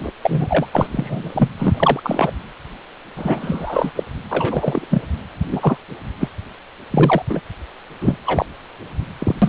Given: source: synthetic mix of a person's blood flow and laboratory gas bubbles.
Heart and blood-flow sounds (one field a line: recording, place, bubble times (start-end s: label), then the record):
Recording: Doppler ultrasound of blood flow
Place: precordium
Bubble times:
0.00-0.11 s: bubbles
0.22-0.66 s: bubbles
0.73-0.86 s: bubbles
0.92-1.30 s: bubbles
1.34-1.49 s: bubbles
1.58-2.00 s: bubbles
2.03-2.32 s: bubbles
3.16-3.91 s: bubbles
3.96-4.04 s: bubbles
4.29-4.86 s: bubbles
4.90-5.02 s: bubbles
5.50-5.77 s: bubbles
6.19-6.29 s: bubbles
6.91-7.22 s: bubbles
7.29-7.41 s: bubbles
8.01-8.18 s: bubbles
8.26-8.46 s: bubbles
9.19-9.35 s: bubbles
9.42-9.49 s: bubbles
From the record:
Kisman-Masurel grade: 243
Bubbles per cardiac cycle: several, 3 to 8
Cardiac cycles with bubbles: 100%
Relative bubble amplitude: loud (0.450 to 0.775)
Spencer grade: 3 (all of the cardiac periods contain showers or single bubble signals, but not dominating or overriding the cardiac motion signals)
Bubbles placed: anywhere in the cardiac cycle